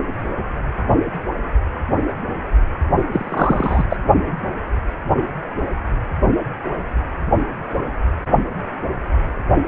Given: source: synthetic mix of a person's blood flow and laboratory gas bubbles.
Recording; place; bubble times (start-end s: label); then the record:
Doppler ultrasound of blood flow; precordium
3.12-3.84 s: bubbles
3.90-3.97 s: bubbles
From the record:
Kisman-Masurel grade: 213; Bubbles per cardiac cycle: several, 3 to 8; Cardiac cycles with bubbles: 1 to 10%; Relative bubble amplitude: loud (0.450 to 0.775); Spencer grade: 1 (occasional bubble signal discernible with the cardiac motion signal, with majority of cardiac periods free of bubbles); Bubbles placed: only in the low amplitude regions of the cardiac cycle